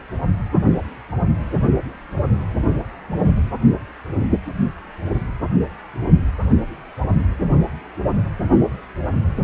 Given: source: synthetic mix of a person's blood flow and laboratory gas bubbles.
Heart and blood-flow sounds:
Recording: Doppler ultrasound of blood flow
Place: precordium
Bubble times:
no bubbles
From the record:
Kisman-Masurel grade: 000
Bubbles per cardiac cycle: 0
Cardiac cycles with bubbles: 0%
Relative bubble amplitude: no bubbles discernible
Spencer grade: 0 (complete lack of bubble signals)

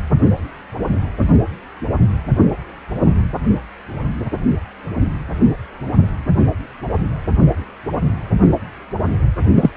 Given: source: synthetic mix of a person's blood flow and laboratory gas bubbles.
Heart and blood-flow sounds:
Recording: Doppler ultrasound of blood flow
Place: precordium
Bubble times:
9.55-9.70 s: bubbles
From the record:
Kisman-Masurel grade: 113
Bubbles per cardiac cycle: 1 to 2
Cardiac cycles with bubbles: 1 to 10%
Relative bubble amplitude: loud (0.450 to 0.775)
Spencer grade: 1 (occasional bubble signal discernible with the cardiac motion signal, with majority of cardiac periods free of bubbles)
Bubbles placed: anywhere in the cardiac cycle

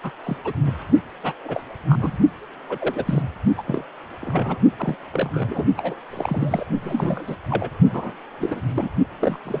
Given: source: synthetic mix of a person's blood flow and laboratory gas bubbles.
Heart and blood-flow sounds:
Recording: Doppler ultrasound of blood flow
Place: precordium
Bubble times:
0.02-0.11 s: bubbles
0.23-0.37 s: bubbles
0.44-0.53 s: bubbles
0.66-0.72 s: bubbles
1.23-1.32 s: bubbles
1.45-1.61 s: bubbles
1.89-2.17 s: bubbles
2.69-3.22 s: bubbles
3.57-3.62 s: bubbles
3.67-3.84 s: bubbles
4.21-4.59 s: bubbles
4.77-4.96 s: bubbles
5.13-5.65 s: bubbles
5.77-5.96 s: bubbles
6.11-6.65 s: bubbles
6.81-7.36 s: bubbles
7.50-7.69 s: bubbles
7.91-8.16 s: bubbles
8.40-8.61 s: bubbles
8.69-8.89 s: bubbles
9.20-9.38 s: bubbles
9.45-9.60 s: bubbles
From the record:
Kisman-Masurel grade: 242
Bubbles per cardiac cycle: several, 3 to 8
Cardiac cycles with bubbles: 100%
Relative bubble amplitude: moderate (0.250 to 0.450)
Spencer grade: 3 (all of the cardiac periods contain showers or single bubble signals, but not dominating or overriding the cardiac motion signals)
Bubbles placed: only in the low amplitude regions of the cardiac cycle

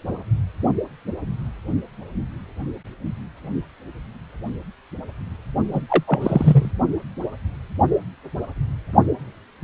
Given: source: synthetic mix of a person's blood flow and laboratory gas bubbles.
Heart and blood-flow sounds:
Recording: Doppler ultrasound of blood flow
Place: precordium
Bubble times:
5.72-5.82 s: bubbles
5.88-6.04 s: bubbles
6.07-6.71 s: bubbles
From the record:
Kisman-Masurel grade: 223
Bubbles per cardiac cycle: several, 3 to 8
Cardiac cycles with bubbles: 10 to 50%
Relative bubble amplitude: loud (0.450 to 0.775)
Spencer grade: 2 (many but less than half of the cardiac periods contain bubble signals, singularly or in groups)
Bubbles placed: only in the low amplitude regions of the cardiac cycle

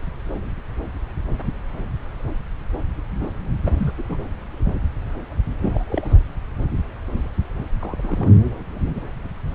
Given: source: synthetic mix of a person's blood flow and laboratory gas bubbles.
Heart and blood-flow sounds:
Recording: Doppler ultrasound of blood flow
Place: subclavian vein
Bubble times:
3.64-3.72 s: bubbles
3.77-3.93 s: bubbles
3.98-4.22 s: bubbles
5.62-5.84 s: bubbles
5.90-6.15 s: bubbles
7.80-8.32 s: bubbles
From the record:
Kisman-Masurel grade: 221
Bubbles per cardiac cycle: several, 3 to 8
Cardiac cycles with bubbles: 10 to 50%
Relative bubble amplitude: barely perceptible (0.100 to 0.250)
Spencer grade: 2 (many but less than half of the cardiac periods contain bubble signals, singularly or in groups)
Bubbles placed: anywhere in the cardiac cycle

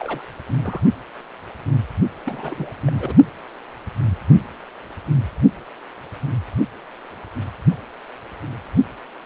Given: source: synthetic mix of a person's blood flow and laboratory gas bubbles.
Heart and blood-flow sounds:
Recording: Doppler ultrasound of blood flow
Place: precordium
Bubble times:
0.00-0.22 s: bubbles
0.62-0.81 s: bubbles
2.25-2.74 s: bubbles
2.86-3.15 s: bubbles
From the record:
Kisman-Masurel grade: 221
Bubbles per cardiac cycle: several, 3 to 8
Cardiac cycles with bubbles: 10 to 50%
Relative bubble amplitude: barely perceptible (0.100 to 0.250)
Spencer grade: 2 (many but less than half of the cardiac periods contain bubble signals, singularly or in groups)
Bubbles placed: only in the low amplitude regions of the cardiac cycle

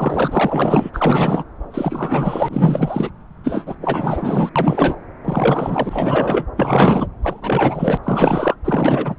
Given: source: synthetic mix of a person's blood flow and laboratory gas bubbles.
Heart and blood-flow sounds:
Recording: Doppler ultrasound of blood flow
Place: subclavian vein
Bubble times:
0.00-0.91 s: bubbles
0.93-1.44 s: bubbles
1.71-3.10 s: bubbles
3.44-3.75 s: bubbles
3.81-4.49 s: bubbles
4.55-4.96 s: bubbles
5.25-6.46 s: bubbles
6.57-7.08 s: bubbles
7.22-7.97 s: bubbles
8.03-8.55 s: bubbles
8.64-9.15 s: bubbles
From the record:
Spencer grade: 4 (maximum detectable bubble signal sounding continuously throughout systole and diastole of every cardiac period, and overriding the amplitude of the normal cardiac signals)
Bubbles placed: anywhere in the cardiac cycle

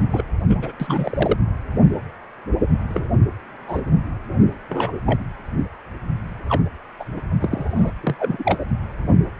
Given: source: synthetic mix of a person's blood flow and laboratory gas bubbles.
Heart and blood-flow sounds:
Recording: Doppler ultrasound of blood flow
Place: precordium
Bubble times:
0.12-0.23 s: bubbles
0.49-0.71 s: bubbles
0.80-1.38 s: bubbles
2.90-3.07 s: bubbles
3.67-3.81 s: bubbles
4.69-5.00 s: bubbles
5.06-5.20 s: bubbles
6.49-6.62 s: bubbles
6.99-7.04 s: bubbles
7.16-7.22 s: bubbles
7.40-7.92 s: bubbles
8.03-8.15 s: bubbles
8.19-8.60 s: bubbles
From the record:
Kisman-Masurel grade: 232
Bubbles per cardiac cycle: several, 3 to 8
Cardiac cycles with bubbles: 50 to 99%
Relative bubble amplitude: moderate (0.250 to 0.450)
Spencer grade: 3 (all of the cardiac periods contain showers or single bubble signals, but not dominating or overriding the cardiac motion signals)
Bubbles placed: anywhere in the cardiac cycle

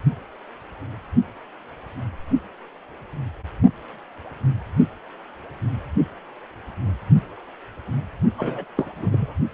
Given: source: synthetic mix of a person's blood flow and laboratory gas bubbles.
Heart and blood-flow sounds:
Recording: Doppler ultrasound of blood flow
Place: precordium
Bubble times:
8.38-8.64 s: bubbles
8.75-9.35 s: bubbles
From the record:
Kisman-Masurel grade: 212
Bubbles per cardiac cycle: several, 3 to 8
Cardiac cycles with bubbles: 1 to 10%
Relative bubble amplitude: moderate (0.250 to 0.450)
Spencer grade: 1 (occasional bubble signal discernible with the cardiac motion signal, with majority of cardiac periods free of bubbles)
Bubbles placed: only in the low amplitude regions of the cardiac cycle

